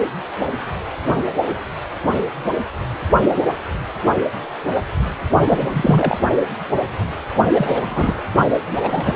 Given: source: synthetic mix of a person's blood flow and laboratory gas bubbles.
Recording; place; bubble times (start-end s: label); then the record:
Doppler ultrasound of blood flow; precordium
5.44-6.17 s: bubbles
7.53-8.21 s: bubbles
8.73-9.15 s: bubbles
From the record:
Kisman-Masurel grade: 223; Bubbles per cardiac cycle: several, 3 to 8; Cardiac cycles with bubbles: 10 to 50%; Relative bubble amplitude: loud (0.450 to 0.775); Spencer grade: 2 (many but less than half of the cardiac periods contain bubble signals, singularly or in groups); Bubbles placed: only in the low amplitude regions of the cardiac cycle